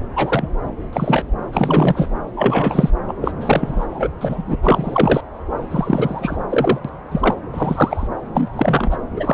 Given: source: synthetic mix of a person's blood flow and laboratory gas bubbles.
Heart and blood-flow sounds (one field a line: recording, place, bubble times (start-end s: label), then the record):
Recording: Doppler ultrasound of blood flow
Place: subclavian vein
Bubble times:
0.15-0.47 s: bubbles
0.93-1.25 s: bubbles
1.52-2.09 s: bubbles
2.36-2.90 s: bubbles
3.07-3.15 s: bubbles
3.21-3.31 s: bubbles
3.40-3.85 s: bubbles
3.91-4.09 s: bubbles
4.21-4.56 s: bubbles
4.63-5.21 s: bubbles
5.71-6.37 s: bubbles
6.49-6.79 s: bubbles
6.84-6.89 s: bubbles
7.11-7.34 s: bubbles
7.54-8.08 s: bubbles
8.35-8.50 s: bubbles
8.53-8.97 s: bubbles
9.16-9.34 s: bubbles
From the record:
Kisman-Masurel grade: 243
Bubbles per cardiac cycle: several, 3 to 8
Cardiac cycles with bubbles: 100%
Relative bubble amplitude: loud (0.450 to 0.775)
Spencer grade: 3 (all of the cardiac periods contain showers or single bubble signals, but not dominating or overriding the cardiac motion signals)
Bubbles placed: anywhere in the cardiac cycle